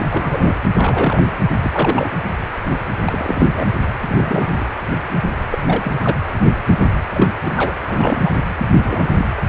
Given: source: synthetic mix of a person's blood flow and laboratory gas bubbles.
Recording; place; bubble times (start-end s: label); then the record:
Doppler ultrasound of blood flow; precordium
0.00-0.10 s: bubbles
0.12-0.54 s: bubbles
0.76-1.22 s: bubbles
1.62-2.10 s: bubbles
3.06-3.66 s: bubbles
4.02-4.68 s: bubbles
5.50-5.93 s: bubbles
6.02-6.16 s: bubbles
6.43-6.52 s: bubbles
6.79-6.93 s: bubbles
7.12-7.42 s: bubbles
7.45-7.75 s: bubbles
7.82-8.41 s: bubbles
8.57-8.66 s: bubbles
8.74-9.08 s: bubbles
9.17-9.26 s: bubbles
9.37-9.43 s: bubbles
From the record:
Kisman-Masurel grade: 232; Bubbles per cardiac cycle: several, 3 to 8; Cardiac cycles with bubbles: 50 to 99%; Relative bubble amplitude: moderate (0.250 to 0.450); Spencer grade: 3 (all of the cardiac periods contain showers or single bubble signals, but not dominating or overriding the cardiac motion signals); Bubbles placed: anywhere in the cardiac cycle